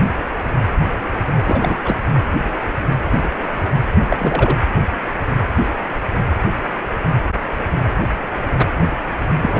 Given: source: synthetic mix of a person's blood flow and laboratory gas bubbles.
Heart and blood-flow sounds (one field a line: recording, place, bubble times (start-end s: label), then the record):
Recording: Doppler ultrasound of blood flow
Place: precordium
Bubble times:
1.44-1.81 s: bubbles
1.83-2.02 s: bubbles
3.10-3.18 s: bubbles
3.22-3.29 s: bubbles
3.42-3.48 s: bubbles
4.09-4.59 s: bubbles
9.42-9.59 s: bubbles
From the record:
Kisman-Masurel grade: 223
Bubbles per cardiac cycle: several, 3 to 8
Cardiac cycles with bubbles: 10 to 50%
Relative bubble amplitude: loud (0.450 to 0.775)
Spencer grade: 2 (many but less than half of the cardiac periods contain bubble signals, singularly or in groups)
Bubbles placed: anywhere in the cardiac cycle